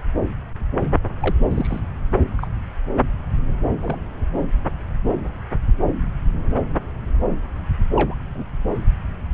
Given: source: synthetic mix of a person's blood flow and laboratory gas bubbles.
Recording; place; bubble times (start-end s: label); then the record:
Doppler ultrasound of blood flow; subclavian vein
1.20-1.35 s: bubbles
1.51-1.81 s: bubbles
2.39-2.47 s: bubbles
3.82-3.97 s: bubbles
7.92-8.15 s: bubbles
8.34-8.43 s: bubbles
From the record:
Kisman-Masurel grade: 121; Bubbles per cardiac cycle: 1 to 2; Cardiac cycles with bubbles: 10 to 50%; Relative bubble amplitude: barely perceptible (0.100 to 0.250); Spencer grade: 2 (many but less than half of the cardiac periods contain bubble signals, singularly or in groups); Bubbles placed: anywhere in the cardiac cycle